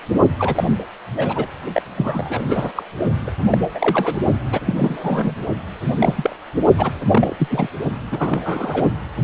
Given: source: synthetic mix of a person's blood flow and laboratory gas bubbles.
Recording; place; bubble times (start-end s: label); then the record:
Doppler ultrasound of blood flow; precordium
0.39-0.64 s: bubbles
1.16-1.47 s: bubbles
1.73-1.82 s: bubbles
1.96-2.43 s: bubbles
2.48-2.71 s: bubbles
2.75-2.83 s: bubbles
3.27-3.31 s: bubbles
3.52-3.58 s: bubbles
3.74-4.18 s: bubbles
4.52-4.60 s: bubbles
4.66-5.34 s: bubbles
5.99-6.36 s: bubbles
6.78-6.91 s: bubbles
7.11-7.47 s: bubbles
7.50-7.68 s: bubbles
8.11-8.88 s: bubbles
From the record:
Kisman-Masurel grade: 242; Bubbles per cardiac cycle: several, 3 to 8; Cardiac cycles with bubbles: 100%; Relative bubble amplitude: moderate (0.250 to 0.450); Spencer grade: 3 (all of the cardiac periods contain showers or single bubble signals, but not dominating or overriding the cardiac motion signals); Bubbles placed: only in the low amplitude regions of the cardiac cycle